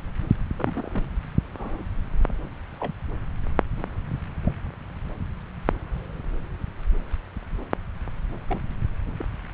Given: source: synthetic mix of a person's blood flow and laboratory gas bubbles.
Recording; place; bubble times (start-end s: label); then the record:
Doppler ultrasound of blood flow; subclavian vein
0.56-1.07 s: bubbles
1.58-1.82 s: bubbles
2.80-2.93 s: bubbles
4.46-4.52 s: bubbles
8.48-8.60 s: bubbles
9.18-9.25 s: bubbles
From the record:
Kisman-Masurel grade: 121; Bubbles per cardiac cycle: 1 to 2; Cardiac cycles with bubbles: 10 to 50%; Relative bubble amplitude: barely perceptible (0.100 to 0.250); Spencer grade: 2 (many but less than half of the cardiac periods contain bubble signals, singularly or in groups); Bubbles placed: anywhere in the cardiac cycle